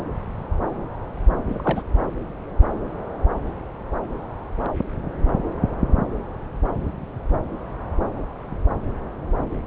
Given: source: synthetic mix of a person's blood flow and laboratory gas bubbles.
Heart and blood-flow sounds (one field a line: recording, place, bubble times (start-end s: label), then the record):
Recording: Doppler ultrasound of blood flow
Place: subclavian vein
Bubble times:
1.49-1.82 s: bubbles
From the record:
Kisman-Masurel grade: 211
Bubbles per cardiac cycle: several, 3 to 8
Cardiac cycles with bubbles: 1 to 10%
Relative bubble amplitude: barely perceptible (0.100 to 0.250)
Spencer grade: 1 (occasional bubble signal discernible with the cardiac motion signal, with majority of cardiac periods free of bubbles)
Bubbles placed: anywhere in the cardiac cycle